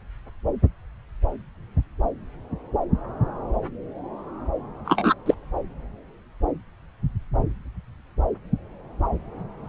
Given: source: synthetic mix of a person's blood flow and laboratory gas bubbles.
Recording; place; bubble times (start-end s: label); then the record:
Doppler ultrasound of blood flow; subclavian vein
4.85-5.14 s: bubbles
5.26-5.34 s: bubbles
From the record:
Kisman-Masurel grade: 123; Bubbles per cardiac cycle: 1 to 2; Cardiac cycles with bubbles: 10 to 50%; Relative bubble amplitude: loud (0.450 to 0.775); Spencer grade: 2 (many but less than half of the cardiac periods contain bubble signals, singularly or in groups); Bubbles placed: anywhere in the cardiac cycle